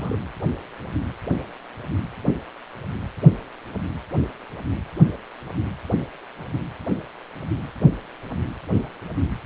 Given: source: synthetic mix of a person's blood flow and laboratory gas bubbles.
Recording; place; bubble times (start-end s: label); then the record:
Doppler ultrasound of blood flow; precordium
0.00-0.18 s: bubbles
From the record:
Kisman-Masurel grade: 211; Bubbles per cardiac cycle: several, 3 to 8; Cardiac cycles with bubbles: 1 to 10%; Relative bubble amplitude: barely perceptible (0.100 to 0.250); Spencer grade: 1 (occasional bubble signal discernible with the cardiac motion signal, with majority of cardiac periods free of bubbles); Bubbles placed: anywhere in the cardiac cycle